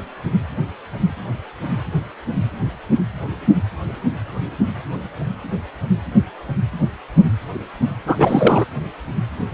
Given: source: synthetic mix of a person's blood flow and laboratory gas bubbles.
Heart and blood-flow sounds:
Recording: Doppler ultrasound of blood flow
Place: precordium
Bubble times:
8.06-8.65 s: bubbles
From the record:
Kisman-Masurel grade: 213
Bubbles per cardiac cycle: several, 3 to 8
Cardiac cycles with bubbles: 1 to 10%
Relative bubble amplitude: loud (0.450 to 0.775)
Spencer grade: 1 (occasional bubble signal discernible with the cardiac motion signal, with majority of cardiac periods free of bubbles)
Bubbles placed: anywhere in the cardiac cycle

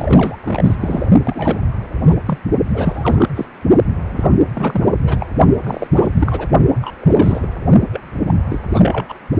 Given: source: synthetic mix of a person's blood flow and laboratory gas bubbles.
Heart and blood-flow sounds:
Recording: Doppler ultrasound of blood flow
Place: precordium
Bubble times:
0.00-0.38 s: bubbles
0.43-0.76 s: bubbles
0.79-1.07 s: bubbles
1.24-1.61 s: bubbles
2.08-2.15 s: bubbles
2.25-2.38 s: bubbles
2.74-3.29 s: bubbles
3.34-3.45 s: bubbles
4.06-4.38 s: bubbles
4.54-4.94 s: bubbles
5.03-5.26 s: bubbles
5.63-5.87 s: bubbles
5.93-6.48 s: bubbles
6.82-6.94 s: bubbles
7.01-7.48 s: bubbles
7.93-8.01 s: bubbles
8.27-8.38 s: bubbles
8.49-8.60 s: bubbles
8.68-9.14 s: bubbles
From the record:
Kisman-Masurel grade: 342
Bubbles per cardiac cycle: rolling drumbeat, 9 or more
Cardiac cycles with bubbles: 100%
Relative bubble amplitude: moderate (0.250 to 0.450)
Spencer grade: 3 (all of the cardiac periods contain showers or single bubble signals, but not dominating or overriding the cardiac motion signals)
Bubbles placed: only in the low amplitude regions of the cardiac cycle

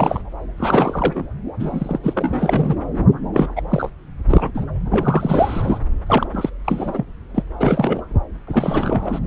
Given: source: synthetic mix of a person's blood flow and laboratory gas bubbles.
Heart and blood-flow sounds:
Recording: Doppler ultrasound of blood flow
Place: subclavian vein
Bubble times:
0.00-0.22 s: bubbles
0.57-1.23 s: bubbles
1.59-1.99 s: bubbles
2.03-2.75 s: bubbles
3.33-3.48 s: bubbles
3.56-3.62 s: bubbles
3.70-3.90 s: bubbles
4.29-4.51 s: bubbles
4.54-4.64 s: bubbles
4.91-5.79 s: bubbles
6.06-6.26 s: bubbles
6.33-6.50 s: bubbles
6.64-7.05 s: bubbles
7.34-7.42 s: bubbles
7.61-8.02 s: bubbles
8.47-9.20 s: bubbles
From the record:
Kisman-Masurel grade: 332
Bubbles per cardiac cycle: rolling drumbeat, 9 or more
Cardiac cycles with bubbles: 50 to 99%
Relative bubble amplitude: moderate (0.250 to 0.450)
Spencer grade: 3 (all of the cardiac periods contain showers or single bubble signals, but not dominating or overriding the cardiac motion signals)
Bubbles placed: anywhere in the cardiac cycle

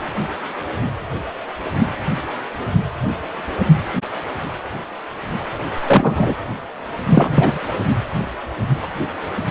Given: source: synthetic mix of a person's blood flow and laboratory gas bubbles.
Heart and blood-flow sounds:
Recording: Doppler ultrasound of blood flow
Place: precordium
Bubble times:
5.85-6.35 s: bubbles
7.09-7.58 s: bubbles
From the record:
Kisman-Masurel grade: 223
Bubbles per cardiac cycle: several, 3 to 8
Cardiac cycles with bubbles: 10 to 50%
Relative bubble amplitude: loud (0.450 to 0.775)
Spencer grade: 2 (many but less than half of the cardiac periods contain bubble signals, singularly or in groups)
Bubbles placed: anywhere in the cardiac cycle

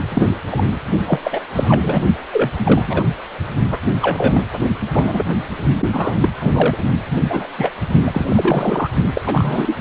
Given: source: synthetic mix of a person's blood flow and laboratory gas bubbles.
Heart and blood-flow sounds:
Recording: Doppler ultrasound of blood flow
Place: precordium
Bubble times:
0.10-0.29 s: bubbles
0.50-0.64 s: bubbles
1.06-1.19 s: bubbles
1.24-1.41 s: bubbles
1.55-2.02 s: bubbles
2.32-2.50 s: bubbles
2.56-2.82 s: bubbles
2.87-3.04 s: bubbles
3.71-3.79 s: bubbles
3.88-3.97 s: bubbles
4.01-4.45 s: bubbles
4.92-5.25 s: bubbles
5.80-5.89 s: bubbles
5.93-6.16 s: bubbles
6.20-6.29 s: bubbles
6.41-6.77 s: bubbles
7.10-7.17 s: bubbles
7.29-7.49 s: bubbles
7.58-7.71 s: bubbles
8.05-8.89 s: bubbles
9.14-9.21 s: bubbles
9.26-9.78 s: bubbles
From the record:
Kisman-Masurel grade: 243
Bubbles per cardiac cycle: several, 3 to 8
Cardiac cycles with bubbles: 100%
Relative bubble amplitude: loud (0.450 to 0.775)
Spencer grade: 3 (all of the cardiac periods contain showers or single bubble signals, but not dominating or overriding the cardiac motion signals)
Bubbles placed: only in the low amplitude regions of the cardiac cycle

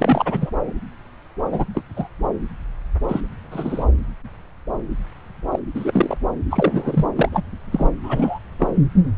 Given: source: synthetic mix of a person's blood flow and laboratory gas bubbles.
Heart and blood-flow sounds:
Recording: Doppler ultrasound of blood flow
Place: subclavian vein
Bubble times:
0.00-0.50 s: bubbles
1.52-1.65 s: bubbles
1.75-1.83 s: bubbles
1.96-2.07 s: bubbles
3.08-3.21 s: bubbles
3.50-3.85 s: bubbles
5.52-5.59 s: bubbles
5.74-6.18 s: bubbles
6.50-7.06 s: bubbles
7.16-7.29 s: bubbles
7.32-7.44 s: bubbles
7.72-7.91 s: bubbles
8.03-8.39 s: bubbles
8.59-8.67 s: bubbles
From the record:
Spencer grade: 3 (all of the cardiac periods contain showers or single bubble signals, but not dominating or overriding the cardiac motion signals)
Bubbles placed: anywhere in the cardiac cycle

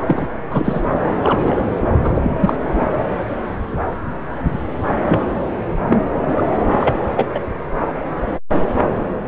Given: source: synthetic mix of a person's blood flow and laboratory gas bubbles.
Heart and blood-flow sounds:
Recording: Doppler ultrasound of blood flow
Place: subclavian vein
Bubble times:
0.06-0.28 s: bubbles
0.50-0.81 s: bubbles
1.23-1.56 s: bubbles
2.03-2.35 s: bubbles
2.40-2.56 s: bubbles
5.07-5.20 s: bubbles
5.87-5.99 s: bubbles
6.37-6.43 s: bubbles
6.71-6.95 s: bubbles
7.16-7.26 s: bubbles
7.34-7.41 s: bubbles
From the record:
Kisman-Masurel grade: 223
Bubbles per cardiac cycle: several, 3 to 8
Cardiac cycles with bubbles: 10 to 50%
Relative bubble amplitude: loud (0.450 to 0.775)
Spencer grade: 2 (many but less than half of the cardiac periods contain bubble signals, singularly or in groups)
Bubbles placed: anywhere in the cardiac cycle

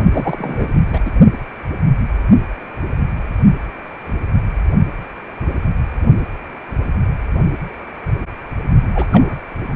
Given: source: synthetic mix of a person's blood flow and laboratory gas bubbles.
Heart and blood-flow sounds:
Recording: Doppler ultrasound of blood flow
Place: precordium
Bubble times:
0.12-0.67 s: bubbles
0.73-0.85 s: bubbles
0.92-1.01 s: bubbles
1.05-1.11 s: bubbles
8.95-9.08 s: bubbles
9.11-9.37 s: bubbles
From the record:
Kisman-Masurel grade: 222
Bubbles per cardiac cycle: several, 3 to 8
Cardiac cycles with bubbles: 10 to 50%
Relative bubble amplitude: moderate (0.250 to 0.450)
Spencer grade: 2 (many but less than half of the cardiac periods contain bubble signals, singularly or in groups)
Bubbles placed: only in the low amplitude regions of the cardiac cycle

